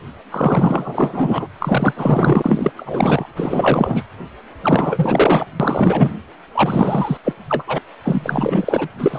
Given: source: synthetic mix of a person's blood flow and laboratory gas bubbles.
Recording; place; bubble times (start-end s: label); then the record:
Doppler ultrasound of blood flow; precordium
0.31-1.49 s: bubbles
1.60-1.93 s: bubbles
1.96-2.72 s: bubbles
2.77-3.25 s: bubbles
3.36-4.03 s: bubbles
4.63-5.46 s: bubbles
5.59-6.12 s: bubbles
6.54-7.17 s: bubbles
7.23-7.33 s: bubbles
7.48-7.63 s: bubbles
7.67-7.78 s: bubbles
8.04-8.88 s: bubbles
8.98-9.19 s: bubbles
From the record:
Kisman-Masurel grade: 444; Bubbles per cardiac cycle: continuous sound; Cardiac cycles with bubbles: 100%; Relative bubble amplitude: maximal (0.775 to 0.999); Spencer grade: 4 (maximum detectable bubble signal sounding continuously throughout systole and diastole of every cardiac period, and overriding the amplitude of the normal cardiac signals); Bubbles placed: anywhere in the cardiac cycle